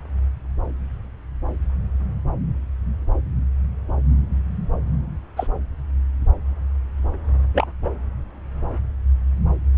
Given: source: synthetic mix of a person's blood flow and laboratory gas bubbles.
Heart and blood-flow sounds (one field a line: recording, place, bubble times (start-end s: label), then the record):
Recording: Doppler ultrasound of blood flow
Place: subclavian vein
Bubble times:
5.36-5.47 s: bubbles
7.53-7.67 s: bubbles
7.84-7.93 s: bubbles
From the record:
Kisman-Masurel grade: 123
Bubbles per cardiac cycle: 1 to 2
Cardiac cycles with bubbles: 10 to 50%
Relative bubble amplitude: loud (0.450 to 0.775)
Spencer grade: 2 (many but less than half of the cardiac periods contain bubble signals, singularly or in groups)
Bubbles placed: anywhere in the cardiac cycle